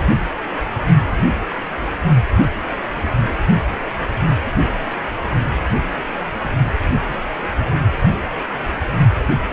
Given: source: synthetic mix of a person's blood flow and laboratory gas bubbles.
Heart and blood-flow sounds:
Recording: Doppler ultrasound of blood flow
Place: precordium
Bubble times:
4.44-4.52 s: bubbles
4.90-4.98 s: bubbles
From the record:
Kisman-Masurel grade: 111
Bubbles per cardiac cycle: 1 to 2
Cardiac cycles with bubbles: 1 to 10%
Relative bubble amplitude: barely perceptible (0.100 to 0.250)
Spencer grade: 1 (occasional bubble signal discernible with the cardiac motion signal, with majority of cardiac periods free of bubbles)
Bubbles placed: only in the low amplitude regions of the cardiac cycle

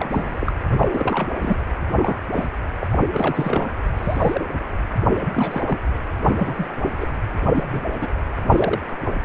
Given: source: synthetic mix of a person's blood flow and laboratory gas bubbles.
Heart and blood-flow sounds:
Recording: Doppler ultrasound of blood flow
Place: precordium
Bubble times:
0.00-0.52 s: bubbles
0.65-1.28 s: bubbles
1.35-1.56 s: bubbles
1.90-2.19 s: bubbles
2.31-2.49 s: bubbles
2.80-2.87 s: bubbles
2.92-2.98 s: bubbles
3.13-3.74 s: bubbles
3.96-4.45 s: bubbles
5.09-5.25 s: bubbles
5.33-5.62 s: bubbles
5.67-5.78 s: bubbles
6.18-6.71 s: bubbles
6.83-6.92 s: bubbles
7.00-7.07 s: bubbles
7.55-7.81 s: bubbles
7.92-7.98 s: bubbles
8.01-8.08 s: bubbles
8.49-8.80 s: bubbles
From the record:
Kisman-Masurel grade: 232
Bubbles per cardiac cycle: several, 3 to 8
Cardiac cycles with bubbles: 50 to 99%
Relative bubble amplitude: moderate (0.250 to 0.450)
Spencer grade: 3 (all of the cardiac periods contain showers or single bubble signals, but not dominating or overriding the cardiac motion signals)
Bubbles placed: anywhere in the cardiac cycle

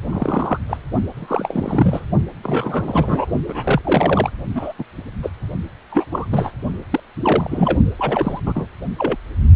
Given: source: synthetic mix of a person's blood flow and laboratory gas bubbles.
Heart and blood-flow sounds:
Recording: Doppler ultrasound of blood flow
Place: precordium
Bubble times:
0.02-0.58 s: bubbles
0.69-0.77 s: bubbles
1.13-2.05 s: bubbles
2.43-3.26 s: bubbles
3.46-4.30 s: bubbles
4.54-4.73 s: bubbles
4.79-4.83 s: bubbles
5.22-5.30 s: bubbles
5.92-6.05 s: bubbles
6.12-6.27 s: bubbles
6.31-6.51 s: bubbles
6.90-7.00 s: bubbles
7.24-7.79 s: bubbles
7.98-8.40 s: bubbles
8.46-8.67 s: bubbles
8.98-9.17 s: bubbles
From the record:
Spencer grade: 3 (all of the cardiac periods contain showers or single bubble signals, but not dominating or overriding the cardiac motion signals)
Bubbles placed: only in the low amplitude regions of the cardiac cycle

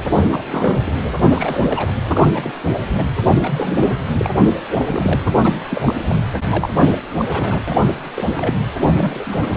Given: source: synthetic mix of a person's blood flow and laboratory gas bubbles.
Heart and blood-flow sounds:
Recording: Doppler ultrasound of blood flow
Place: precordium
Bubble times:
0.18-0.43 s: bubbles
0.49-1.01 s: bubbles
1.17-1.92 s: bubbles
2.15-2.30 s: bubbles
2.34-2.52 s: bubbles
2.72-2.83 s: bubbles
2.95-3.04 s: bubbles
3.33-3.78 s: bubbles
3.81-3.98 s: bubbles
4.18-4.30 s: bubbles
4.75-5.20 s: bubbles
5.28-5.34 s: bubbles
5.44-5.61 s: bubbles
5.70-5.94 s: bubbles
6.02-6.16 s: bubbles
6.50-7.02 s: bubbles
7.17-7.25 s: bubbles
7.29-7.61 s: bubbles
7.67-7.92 s: bubbles
8.15-8.61 s: bubbles
8.82-9.57 s: bubbles
From the record:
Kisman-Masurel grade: 342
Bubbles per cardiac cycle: rolling drumbeat, 9 or more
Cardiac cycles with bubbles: 100%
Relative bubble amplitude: moderate (0.250 to 0.450)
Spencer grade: 3 (all of the cardiac periods contain showers or single bubble signals, but not dominating or overriding the cardiac motion signals)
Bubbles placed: anywhere in the cardiac cycle

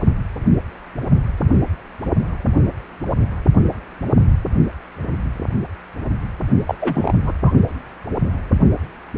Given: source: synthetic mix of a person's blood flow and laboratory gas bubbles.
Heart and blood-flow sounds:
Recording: Doppler ultrasound of blood flow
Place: precordium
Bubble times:
6.67-6.75 s: bubbles
6.79-7.14 s: bubbles
7.22-7.32 s: bubbles
7.42-7.52 s: bubbles
From the record:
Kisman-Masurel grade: 212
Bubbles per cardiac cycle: several, 3 to 8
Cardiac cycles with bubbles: 1 to 10%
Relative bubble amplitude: moderate (0.250 to 0.450)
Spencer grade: 1 (occasional bubble signal discernible with the cardiac motion signal, with majority of cardiac periods free of bubbles)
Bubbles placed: only in the low amplitude regions of the cardiac cycle

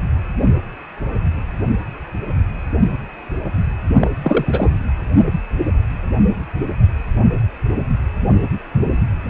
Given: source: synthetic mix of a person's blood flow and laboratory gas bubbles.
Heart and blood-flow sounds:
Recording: Doppler ultrasound of blood flow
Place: precordium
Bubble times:
4.00-4.10 s: bubbles
4.23-4.71 s: bubbles
From the record:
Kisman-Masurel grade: 213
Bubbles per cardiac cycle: several, 3 to 8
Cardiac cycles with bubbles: 1 to 10%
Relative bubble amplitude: loud (0.450 to 0.775)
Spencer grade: 1 (occasional bubble signal discernible with the cardiac motion signal, with majority of cardiac periods free of bubbles)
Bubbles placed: only in the low amplitude regions of the cardiac cycle

